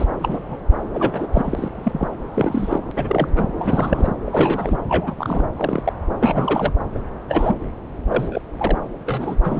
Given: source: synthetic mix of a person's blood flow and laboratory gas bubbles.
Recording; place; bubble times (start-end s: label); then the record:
Doppler ultrasound of blood flow; subclavian vein
0.00-0.07 s: bubbles
0.20-0.58 s: bubbles
0.93-1.26 s: bubbles
1.32-2.15 s: bubbles
2.34-2.82 s: bubbles
2.96-3.29 s: bubbles
3.35-3.47 s: bubbles
3.57-4.14 s: bubbles
4.25-4.77 s: bubbles
4.88-5.14 s: bubbles
5.17-5.44 s: bubbles
5.56-5.82 s: bubbles
5.85-5.93 s: bubbles
6.19-6.73 s: bubbles
6.94-7.00 s: bubbles
7.28-7.56 s: bubbles
8.09-8.41 s: bubbles
8.58-8.78 s: bubbles
9.07-9.36 s: bubbles
9.44-9.60 s: bubbles
From the record:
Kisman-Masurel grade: 242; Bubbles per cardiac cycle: several, 3 to 8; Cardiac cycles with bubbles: 100%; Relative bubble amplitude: moderate (0.250 to 0.450); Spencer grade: 3 (all of the cardiac periods contain showers or single bubble signals, but not dominating or overriding the cardiac motion signals); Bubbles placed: anywhere in the cardiac cycle